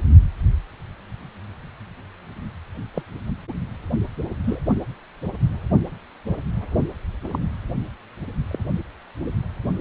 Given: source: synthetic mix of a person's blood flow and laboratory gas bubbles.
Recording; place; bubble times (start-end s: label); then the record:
Doppler ultrasound of blood flow; precordium
2.94-3.03 s: bubbles
4.46-4.60 s: bubbles
7.24-7.39 s: bubbles
8.51-8.59 s: bubbles
From the record:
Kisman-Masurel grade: 121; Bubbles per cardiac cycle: 1 to 2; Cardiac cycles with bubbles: 10 to 50%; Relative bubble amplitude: barely perceptible (0.100 to 0.250); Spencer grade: 2 (many but less than half of the cardiac periods contain bubble signals, singularly or in groups); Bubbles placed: only in the low amplitude regions of the cardiac cycle